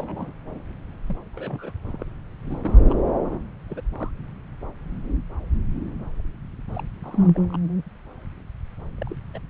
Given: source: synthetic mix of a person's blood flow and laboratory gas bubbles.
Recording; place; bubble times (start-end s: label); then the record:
Doppler ultrasound of blood flow; subclavian vein
0.00-0.32 s: bubbles
0.54-0.62 s: bubbles
1.08-1.17 s: bubbles
1.33-1.72 s: bubbles
1.85-2.05 s: bubbles
2.44-3.00 s: bubbles
3.25-3.39 s: bubbles
3.70-3.81 s: bubbles
3.92-4.11 s: bubbles
6.73-6.83 s: bubbles
7.03-7.42 s: bubbles
7.49-7.59 s: bubbles
8.98-9.15 s: bubbles
9.33-9.38 s: bubbles
From the record:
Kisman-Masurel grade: 221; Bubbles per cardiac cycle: several, 3 to 8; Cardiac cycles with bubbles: 10 to 50%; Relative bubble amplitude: barely perceptible (0.100 to 0.250); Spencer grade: 2 (many but less than half of the cardiac periods contain bubble signals, singularly or in groups); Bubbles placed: anywhere in the cardiac cycle